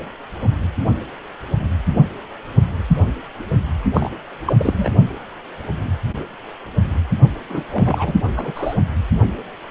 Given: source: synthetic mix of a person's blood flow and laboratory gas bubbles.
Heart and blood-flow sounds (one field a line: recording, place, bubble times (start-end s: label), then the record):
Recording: Doppler ultrasound of blood flow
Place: precordium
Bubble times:
3.93-4.09 s: bubbles
4.46-4.55 s: bubbles
4.58-4.89 s: bubbles
7.49-7.63 s: bubbles
7.71-8.14 s: bubbles
8.36-8.75 s: bubbles
From the record:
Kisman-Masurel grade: 222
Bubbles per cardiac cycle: several, 3 to 8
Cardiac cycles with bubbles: 10 to 50%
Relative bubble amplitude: moderate (0.250 to 0.450)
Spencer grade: 2 (many but less than half of the cardiac periods contain bubble signals, singularly or in groups)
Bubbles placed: only in the low amplitude regions of the cardiac cycle